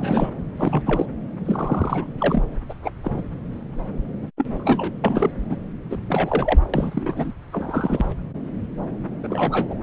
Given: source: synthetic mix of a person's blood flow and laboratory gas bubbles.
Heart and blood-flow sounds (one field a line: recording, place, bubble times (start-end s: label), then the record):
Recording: Doppler ultrasound of blood flow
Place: subclavian vein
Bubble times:
0.00-0.30 s: bubbles
0.57-0.82 s: bubbles
0.86-1.05 s: bubbles
1.45-2.10 s: bubbles
2.19-2.43 s: bubbles
2.69-2.74 s: bubbles
2.84-2.91 s: bubbles
3.03-3.23 s: bubbles
4.38-4.46 s: bubbles
4.57-4.93 s: bubbles
5.04-5.30 s: bubbles
5.49-5.57 s: bubbles
5.90-5.98 s: bubbles
6.09-6.59 s: bubbles
6.73-7.31 s: bubbles
7.52-8.05 s: bubbles
9.23-9.79 s: bubbles
From the record:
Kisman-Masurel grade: 232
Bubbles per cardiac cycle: several, 3 to 8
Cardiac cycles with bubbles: 50 to 99%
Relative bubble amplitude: moderate (0.250 to 0.450)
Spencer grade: 3 (all of the cardiac periods contain showers or single bubble signals, but not dominating or overriding the cardiac motion signals)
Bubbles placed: anywhere in the cardiac cycle